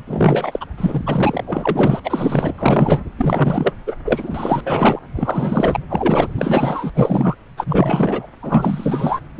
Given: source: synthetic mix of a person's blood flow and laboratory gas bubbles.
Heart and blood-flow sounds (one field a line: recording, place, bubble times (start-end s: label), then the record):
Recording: Doppler ultrasound of blood flow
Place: subclavian vein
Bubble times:
0.07-0.65 s: bubbles
0.77-1.44 s: bubbles
1.46-2.00 s: bubbles
2.04-3.02 s: bubbles
3.18-3.73 s: bubbles
3.87-3.92 s: bubbles
4.05-4.62 s: bubbles
4.66-4.99 s: bubbles
5.15-5.78 s: bubbles
5.88-6.33 s: bubbles
6.37-6.90 s: bubbles
6.95-7.35 s: bubbles
7.57-8.26 s: bubbles
8.42-9.20 s: bubbles
9.37-9.40 s: bubbles
From the record:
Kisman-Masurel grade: 343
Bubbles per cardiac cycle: rolling drumbeat, 9 or more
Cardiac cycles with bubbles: 100%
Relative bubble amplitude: loud (0.450 to 0.775)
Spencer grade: 3 (all of the cardiac periods contain showers or single bubble signals, but not dominating or overriding the cardiac motion signals)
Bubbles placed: anywhere in the cardiac cycle